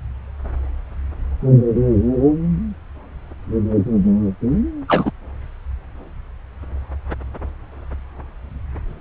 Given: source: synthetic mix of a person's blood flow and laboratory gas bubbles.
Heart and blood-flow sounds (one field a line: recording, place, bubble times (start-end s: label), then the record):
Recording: Doppler ultrasound of blood flow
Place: subclavian vein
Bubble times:
4.88-5.12 s: bubbles
From the record:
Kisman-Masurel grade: 223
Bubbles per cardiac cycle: several, 3 to 8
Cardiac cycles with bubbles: 10 to 50%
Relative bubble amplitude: loud (0.450 to 0.775)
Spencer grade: 2 (many but less than half of the cardiac periods contain bubble signals, singularly or in groups)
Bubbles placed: anywhere in the cardiac cycle